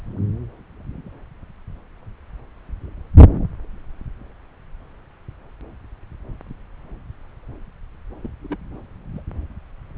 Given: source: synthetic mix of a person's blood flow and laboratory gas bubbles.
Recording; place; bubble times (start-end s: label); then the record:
Doppler ultrasound of blood flow; subclavian vein
8.22-8.30 s: bubbles
8.44-8.56 s: bubbles
9.13-9.22 s: bubbles
From the record:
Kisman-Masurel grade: 121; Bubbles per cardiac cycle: 1 to 2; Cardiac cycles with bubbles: 10 to 50%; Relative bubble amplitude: barely perceptible (0.100 to 0.250); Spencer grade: 2 (many but less than half of the cardiac periods contain bubble signals, singularly or in groups); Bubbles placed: anywhere in the cardiac cycle